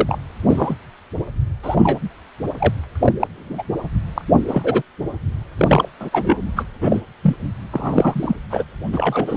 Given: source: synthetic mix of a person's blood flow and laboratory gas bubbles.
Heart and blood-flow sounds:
Doppler ultrasound of blood flow; precordium
0.00-0.17 s: bubbles
0.48-0.75 s: bubbles
1.63-2.00 s: bubbles
2.58-2.73 s: bubbles
2.95-3.12 s: bubbles
3.19-3.27 s: bubbles
3.35-3.68 s: bubbles
4.15-4.21 s: bubbles
4.47-4.82 s: bubbles
5.58-5.89 s: bubbles
6.00-6.09 s: bubbles
6.12-6.38 s: bubbles
6.56-6.64 s: bubbles
6.82-7.01 s: bubbles
7.22-7.36 s: bubbles
7.71-8.36 s: bubbles
8.50-8.63 s: bubbles
8.92-9.37 s: bubbles
From the record:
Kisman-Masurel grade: 243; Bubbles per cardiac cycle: several, 3 to 8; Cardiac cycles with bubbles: 100%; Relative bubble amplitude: loud (0.450 to 0.775); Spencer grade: 3 (all of the cardiac periods contain showers or single bubble signals, but not dominating or overriding the cardiac motion signals); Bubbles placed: anywhere in the cardiac cycle

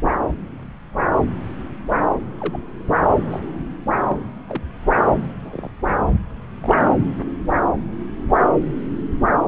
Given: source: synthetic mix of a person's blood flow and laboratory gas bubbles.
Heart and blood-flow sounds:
Doppler ultrasound of blood flow; subclavian vein
2.40-2.59 s: bubbles
3.31-3.40 s: bubbles
4.08-4.17 s: bubbles
4.48-4.63 s: bubbles
5.42-5.71 s: bubbles
5.87-5.92 s: bubbles
6.60-6.91 s: bubbles
From the record:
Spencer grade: 2 (many but less than half of the cardiac periods contain bubble signals, singularly or in groups); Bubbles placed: anywhere in the cardiac cycle

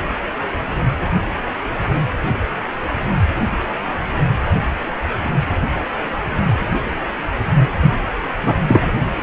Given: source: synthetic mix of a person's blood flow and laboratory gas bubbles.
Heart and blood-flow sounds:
Doppler ultrasound of blood flow; precordium
8.43-8.54 s: bubbles
8.68-8.99 s: bubbles
From the record:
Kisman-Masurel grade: 123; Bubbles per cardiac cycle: 1 to 2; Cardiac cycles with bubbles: 10 to 50%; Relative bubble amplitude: loud (0.450 to 0.775); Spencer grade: 2 (many but less than half of the cardiac periods contain bubble signals, singularly or in groups); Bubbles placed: anywhere in the cardiac cycle

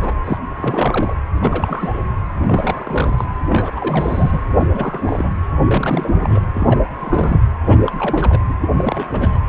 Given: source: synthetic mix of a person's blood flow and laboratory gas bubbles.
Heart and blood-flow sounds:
Doppler ultrasound of blood flow; precordium
0.00-0.13 s: bubbles
0.24-0.38 s: bubbles
0.57-1.13 s: bubbles
1.40-2.02 s: bubbles
2.43-3.24 s: bubbles
3.48-4.44 s: bubbles
4.60-5.29 s: bubbles
5.66-6.12 s: bubbles
6.19-6.42 s: bubbles
6.54-6.79 s: bubbles
6.98-7.40 s: bubbles
7.63-7.92 s: bubbles
7.98-8.41 s: bubbles
8.48-8.57 s: bubbles
8.60-8.69 s: bubbles
8.77-9.40 s: bubbles
From the record:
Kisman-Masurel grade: 342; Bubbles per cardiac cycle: rolling drumbeat, 9 or more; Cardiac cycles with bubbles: 100%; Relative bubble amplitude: moderate (0.250 to 0.450); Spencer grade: 3 (all of the cardiac periods contain showers or single bubble signals, but not dominating or overriding the cardiac motion signals); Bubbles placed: anywhere in the cardiac cycle

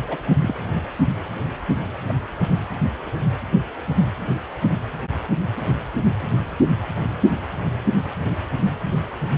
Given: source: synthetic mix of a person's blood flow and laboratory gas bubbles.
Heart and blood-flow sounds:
Doppler ultrasound of blood flow; precordium
0.07-0.16 s: bubbles
0.41-0.54 s: bubbles
2.08-2.15 s: bubbles
From the record:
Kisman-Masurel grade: 122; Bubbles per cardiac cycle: 1 to 2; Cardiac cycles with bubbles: 10 to 50%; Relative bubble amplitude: moderate (0.250 to 0.450); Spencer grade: 2 (many but less than half of the cardiac periods contain bubble signals, singularly or in groups); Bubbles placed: anywhere in the cardiac cycle

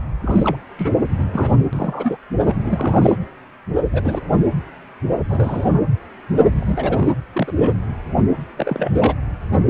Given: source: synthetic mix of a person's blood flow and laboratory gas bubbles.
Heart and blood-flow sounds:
Doppler ultrasound of blood flow; precordium
0.22-0.56 s: bubbles
0.79-0.91 s: bubbles
1.19-1.24 s: bubbles
1.32-1.53 s: bubbles
1.72-2.17 s: bubbles
2.46-3.15 s: bubbles
3.93-4.21 s: bubbles
5.29-5.81 s: bubbles
6.60-7.12 s: bubbles
7.33-7.53 s: bubbles
7.56-7.72 s: bubbles
8.56-9.17 s: bubbles
From the record:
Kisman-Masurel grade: 232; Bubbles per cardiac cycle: several, 3 to 8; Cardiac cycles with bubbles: 50 to 99%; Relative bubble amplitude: moderate (0.250 to 0.450); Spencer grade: 3 (all of the cardiac periods contain showers or single bubble signals, but not dominating or overriding the cardiac motion signals); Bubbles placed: anywhere in the cardiac cycle

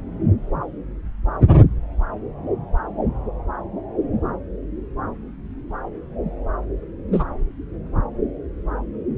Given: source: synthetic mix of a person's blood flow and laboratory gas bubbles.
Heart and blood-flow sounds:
Doppler ultrasound of blood flow; subclavian vein
7.12-7.24 s: bubbles
From the record:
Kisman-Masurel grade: 113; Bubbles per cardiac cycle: 1 to 2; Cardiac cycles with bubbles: 1 to 10%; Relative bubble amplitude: loud (0.450 to 0.775); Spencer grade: 1 (occasional bubble signal discernible with the cardiac motion signal, with majority of cardiac periods free of bubbles); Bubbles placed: anywhere in the cardiac cycle

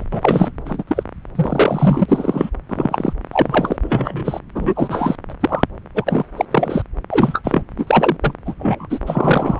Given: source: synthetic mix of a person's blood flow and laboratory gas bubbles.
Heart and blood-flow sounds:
Doppler ultrasound of blood flow; subclavian vein
0.00-0.05 s: bubbles
0.11-0.51 s: bubbles
0.65-0.83 s: bubbles
0.87-1.03 s: bubbles
1.35-2.05 s: bubbles
2.08-2.50 s: bubbles
2.69-3.13 s: bubbles
3.31-3.76 s: bubbles
3.83-4.39 s: bubbles
4.54-5.16 s: bubbles
5.29-5.34 s: bubbles
5.41-5.63 s: bubbles
5.94-6.25 s: bubbles
6.36-6.45 s: bubbles
6.51-6.82 s: bubbles
7.10-7.62 s: bubbles
7.77-8.16 s: bubbles
8.21-8.34 s: bubbles
8.45-8.54 s: bubbles
8.58-8.87 s: bubbles
8.89-8.99 s: bubbles
9.06-9.60 s: bubbles
From the record:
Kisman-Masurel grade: 243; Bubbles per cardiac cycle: several, 3 to 8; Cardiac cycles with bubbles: 100%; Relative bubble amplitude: loud (0.450 to 0.775); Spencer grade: 3 (all of the cardiac periods contain showers or single bubble signals, but not dominating or overriding the cardiac motion signals); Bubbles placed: anywhere in the cardiac cycle

